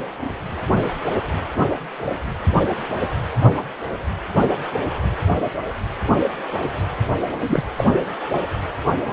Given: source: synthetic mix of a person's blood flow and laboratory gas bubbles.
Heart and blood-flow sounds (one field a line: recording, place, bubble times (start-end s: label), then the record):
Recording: Doppler ultrasound of blood flow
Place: precordium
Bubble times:
7.47-7.64 s: bubbles
7.77-8.00 s: bubbles
From the record:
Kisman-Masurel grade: 212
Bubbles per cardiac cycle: several, 3 to 8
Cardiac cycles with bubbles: 1 to 10%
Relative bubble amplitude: moderate (0.250 to 0.450)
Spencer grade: 1 (occasional bubble signal discernible with the cardiac motion signal, with majority of cardiac periods free of bubbles)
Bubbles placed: anywhere in the cardiac cycle